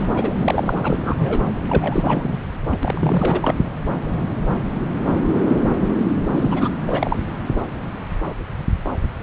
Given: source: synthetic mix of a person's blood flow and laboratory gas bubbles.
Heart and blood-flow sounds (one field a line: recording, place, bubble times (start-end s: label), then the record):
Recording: Doppler ultrasound of blood flow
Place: subclavian vein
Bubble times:
0.00-0.06 s: bubbles
0.15-0.34 s: bubbles
0.38-0.77 s: bubbles
0.83-1.15 s: bubbles
1.19-1.48 s: bubbles
1.69-2.39 s: bubbles
2.69-2.77 s: bubbles
2.83-3.59 s: bubbles
6.32-6.70 s: bubbles
6.87-7.17 s: bubbles
From the record:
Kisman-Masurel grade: 332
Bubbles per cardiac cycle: rolling drumbeat, 9 or more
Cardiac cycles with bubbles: 50 to 99%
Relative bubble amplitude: moderate (0.250 to 0.450)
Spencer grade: 3 (all of the cardiac periods contain showers or single bubble signals, but not dominating or overriding the cardiac motion signals)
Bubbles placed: anywhere in the cardiac cycle